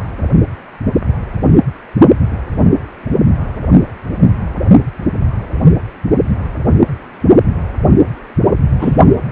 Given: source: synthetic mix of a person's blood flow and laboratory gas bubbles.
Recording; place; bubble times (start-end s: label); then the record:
Doppler ultrasound of blood flow; precordium
8.79-8.96 s: bubbles
From the record:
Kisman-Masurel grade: 213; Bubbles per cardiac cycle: several, 3 to 8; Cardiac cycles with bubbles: 1 to 10%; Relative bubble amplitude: loud (0.450 to 0.775); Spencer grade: 1 (occasional bubble signal discernible with the cardiac motion signal, with majority of cardiac periods free of bubbles); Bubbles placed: only in the low amplitude regions of the cardiac cycle